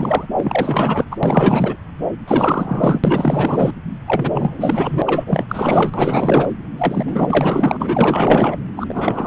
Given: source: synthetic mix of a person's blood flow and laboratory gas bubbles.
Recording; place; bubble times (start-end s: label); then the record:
Doppler ultrasound of blood flow; subclavian vein
0.00-0.27 s: bubbles
0.37-1.05 s: bubbles
1.11-1.17 s: bubbles
1.23-1.77 s: bubbles
2.27-3.00 s: bubbles
3.04-3.73 s: bubbles
4.07-5.02 s: bubbles
5.05-5.45 s: bubbles
5.48-5.91 s: bubbles
5.94-6.51 s: bubbles
6.78-8.57 s: bubbles
8.76-9.26 s: bubbles
From the record:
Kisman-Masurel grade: 444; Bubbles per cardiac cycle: continuous sound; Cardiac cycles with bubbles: 100%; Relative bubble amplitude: maximal (0.775 to 0.999); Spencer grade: 4 (maximum detectable bubble signal sounding continuously throughout systole and diastole of every cardiac period, and overriding the amplitude of the normal cardiac signals); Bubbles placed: anywhere in the cardiac cycle